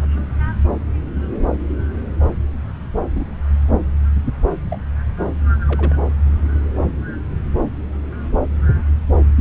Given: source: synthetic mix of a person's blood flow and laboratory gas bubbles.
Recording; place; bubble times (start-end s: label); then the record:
Doppler ultrasound of blood flow; subclavian vein
3.15-3.25 s: bubbles
4.70-4.77 s: bubbles
5.68-5.95 s: bubbles
9.36-9.41 s: bubbles
From the record:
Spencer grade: 2 (many but less than half of the cardiac periods contain bubble signals, singularly or in groups); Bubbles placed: anywhere in the cardiac cycle